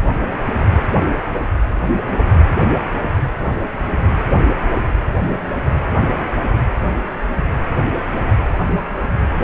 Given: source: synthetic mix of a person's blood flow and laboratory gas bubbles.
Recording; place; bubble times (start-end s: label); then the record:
Doppler ultrasound of blood flow; precordium
no bubbles
From the record:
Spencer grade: 0 (complete lack of bubble signals)